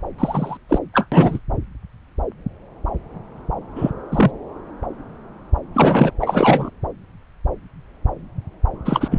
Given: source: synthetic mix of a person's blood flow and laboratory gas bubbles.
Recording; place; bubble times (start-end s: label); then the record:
Doppler ultrasound of blood flow; subclavian vein
0.18-0.57 s: bubbles
0.69-0.78 s: bubbles
0.94-1.07 s: bubbles
1.11-1.39 s: bubbles
3.75-3.91 s: bubbles
4.12-4.32 s: bubbles
5.74-6.11 s: bubbles
6.21-6.70 s: bubbles
8.85-9.08 s: bubbles
9.10-9.19 s: bubbles
From the record:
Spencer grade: 2 (many but less than half of the cardiac periods contain bubble signals, singularly or in groups); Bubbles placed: anywhere in the cardiac cycle